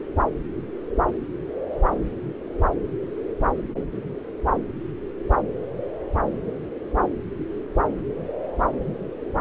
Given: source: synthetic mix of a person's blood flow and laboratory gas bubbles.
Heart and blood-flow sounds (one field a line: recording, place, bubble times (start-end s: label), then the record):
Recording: Doppler ultrasound of blood flow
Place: subclavian vein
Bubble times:
no bubbles
From the record:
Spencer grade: 0 (complete lack of bubble signals)